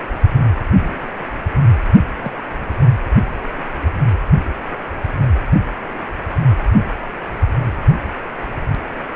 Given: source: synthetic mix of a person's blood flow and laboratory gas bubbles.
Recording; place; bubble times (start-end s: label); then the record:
Doppler ultrasound of blood flow; precordium
0.79-1.10 s: bubbles
2.23-2.31 s: bubbles
3.54-3.62 s: bubbles
From the record:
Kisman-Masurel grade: 121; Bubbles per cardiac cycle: 1 to 2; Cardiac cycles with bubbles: 10 to 50%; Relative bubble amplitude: barely perceptible (0.100 to 0.250); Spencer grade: 2 (many but less than half of the cardiac periods contain bubble signals, singularly or in groups); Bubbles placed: anywhere in the cardiac cycle